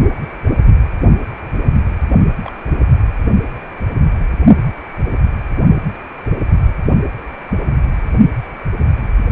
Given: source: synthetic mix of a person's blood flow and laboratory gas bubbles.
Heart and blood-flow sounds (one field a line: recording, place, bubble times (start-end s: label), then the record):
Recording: Doppler ultrasound of blood flow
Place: precordium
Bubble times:
2.42-2.50 s: bubbles
From the record:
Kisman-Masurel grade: 111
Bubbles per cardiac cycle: 1 to 2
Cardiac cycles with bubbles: 1 to 10%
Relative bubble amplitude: barely perceptible (0.100 to 0.250)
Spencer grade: 1 (occasional bubble signal discernible with the cardiac motion signal, with majority of cardiac periods free of bubbles)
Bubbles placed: only in the low amplitude regions of the cardiac cycle